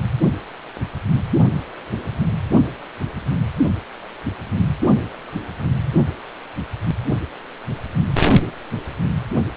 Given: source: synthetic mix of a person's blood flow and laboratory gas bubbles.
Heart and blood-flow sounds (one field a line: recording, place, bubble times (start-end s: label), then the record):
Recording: Doppler ultrasound of blood flow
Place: precordium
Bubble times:
no bubbles
From the record:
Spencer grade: 0 (complete lack of bubble signals)